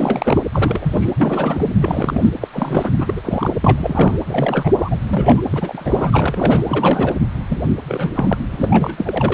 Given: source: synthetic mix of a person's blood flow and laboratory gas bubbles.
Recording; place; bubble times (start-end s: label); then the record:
Doppler ultrasound of blood flow; precordium
0.00-0.40 s: bubbles
0.53-1.13 s: bubbles
1.17-1.67 s: bubbles
1.81-2.29 s: bubbles
2.41-2.48 s: bubbles
2.53-2.90 s: bubbles
2.97-3.21 s: bubbles
3.24-3.50 s: bubbles
3.60-4.19 s: bubbles
4.26-4.69 s: bubbles
4.76-4.98 s: bubbles
5.03-5.42 s: bubbles
5.51-6.64 s: bubbles
6.68-7.15 s: bubbles
7.48-7.61 s: bubbles
7.87-8.38 s: bubbles
8.51-9.34 s: bubbles
From the record:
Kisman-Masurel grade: 342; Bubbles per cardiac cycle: rolling drumbeat, 9 or more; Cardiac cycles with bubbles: 100%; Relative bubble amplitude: moderate (0.250 to 0.450); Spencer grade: 3 (all of the cardiac periods contain showers or single bubble signals, but not dominating or overriding the cardiac motion signals); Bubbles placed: anywhere in the cardiac cycle